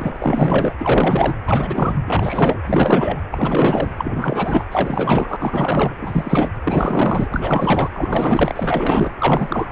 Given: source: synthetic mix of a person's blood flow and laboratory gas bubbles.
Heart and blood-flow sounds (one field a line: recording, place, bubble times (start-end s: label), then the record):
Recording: Doppler ultrasound of blood flow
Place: precordium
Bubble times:
0.00-0.73 s: bubbles
0.78-1.33 s: bubbles
1.46-1.97 s: bubbles
2.08-2.62 s: bubbles
2.66-3.22 s: bubbles
3.32-3.93 s: bubbles
3.97-4.65 s: bubbles
4.71-5.94 s: bubbles
6.01-6.50 s: bubbles
6.63-7.29 s: bubbles
7.31-7.90 s: bubbles
7.93-9.12 s: bubbles
9.19-9.67 s: bubbles
From the record:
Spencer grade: 4 (maximum detectable bubble signal sounding continuously throughout systole and diastole of every cardiac period, and overriding the amplitude of the normal cardiac signals)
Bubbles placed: anywhere in the cardiac cycle